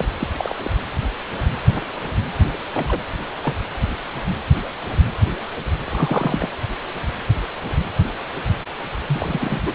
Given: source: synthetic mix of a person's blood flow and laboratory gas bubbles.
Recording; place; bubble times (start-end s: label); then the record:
Doppler ultrasound of blood flow; precordium
0.00-0.05 s: bubbles
0.20-0.29 s: bubbles
0.38-0.55 s: bubbles
0.64-0.70 s: bubbles
2.74-3.01 s: bubbles
3.43-3.54 s: bubbles
5.86-6.48 s: bubbles
9.07-9.71 s: bubbles
From the record:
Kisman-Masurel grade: 222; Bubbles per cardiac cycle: several, 3 to 8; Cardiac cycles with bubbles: 10 to 50%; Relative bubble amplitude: moderate (0.250 to 0.450); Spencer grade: 2 (many but less than half of the cardiac periods contain bubble signals, singularly or in groups); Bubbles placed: anywhere in the cardiac cycle